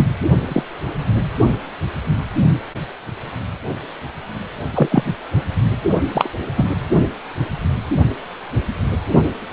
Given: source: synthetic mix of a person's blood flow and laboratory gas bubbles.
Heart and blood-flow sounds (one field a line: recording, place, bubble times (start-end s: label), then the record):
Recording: Doppler ultrasound of blood flow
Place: precordium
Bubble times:
0.00-0.06 s: bubbles
0.48-0.63 s: bubbles
4.74-4.89 s: bubbles
4.91-5.04 s: bubbles
6.14-6.30 s: bubbles
6.57-6.73 s: bubbles
From the record:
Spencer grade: 2 (many but less than half of the cardiac periods contain bubble signals, singularly or in groups)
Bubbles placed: only in the low amplitude regions of the cardiac cycle